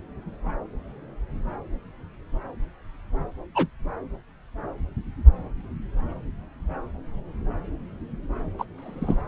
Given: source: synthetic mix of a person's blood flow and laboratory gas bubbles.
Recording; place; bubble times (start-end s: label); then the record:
Doppler ultrasound of blood flow; subclavian vein
3.54-3.67 s: bubbles
8.58-8.64 s: bubbles
8.78-9.21 s: bubbles
From the record:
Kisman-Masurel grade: 122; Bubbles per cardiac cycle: 1 to 2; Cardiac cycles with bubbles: 10 to 50%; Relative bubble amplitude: moderate (0.250 to 0.450); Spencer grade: 2 (many but less than half of the cardiac periods contain bubble signals, singularly or in groups); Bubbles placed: anywhere in the cardiac cycle